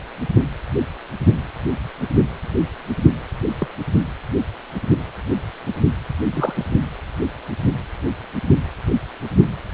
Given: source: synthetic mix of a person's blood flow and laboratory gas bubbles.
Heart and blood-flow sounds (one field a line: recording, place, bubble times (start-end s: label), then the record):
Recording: Doppler ultrasound of blood flow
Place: precordium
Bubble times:
3.58-3.68 s: bubbles
6.33-6.77 s: bubbles
From the record:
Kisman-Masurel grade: 122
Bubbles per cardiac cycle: 1 to 2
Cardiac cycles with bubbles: 10 to 50%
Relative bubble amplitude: moderate (0.250 to 0.450)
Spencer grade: 2 (many but less than half of the cardiac periods contain bubble signals, singularly or in groups)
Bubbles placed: anywhere in the cardiac cycle